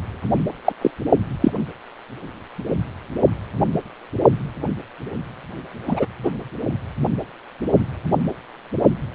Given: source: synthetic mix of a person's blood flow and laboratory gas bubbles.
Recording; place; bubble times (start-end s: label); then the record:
Doppler ultrasound of blood flow; precordium
0.65-0.73 s: bubbles
0.81-0.91 s: bubbles
1.41-1.52 s: bubbles
5.87-6.06 s: bubbles
6.23-6.32 s: bubbles
From the record:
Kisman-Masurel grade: 123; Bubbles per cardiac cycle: 1 to 2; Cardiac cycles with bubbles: 10 to 50%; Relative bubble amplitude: loud (0.450 to 0.775); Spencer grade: 2 (many but less than half of the cardiac periods contain bubble signals, singularly or in groups); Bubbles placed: only in the low amplitude regions of the cardiac cycle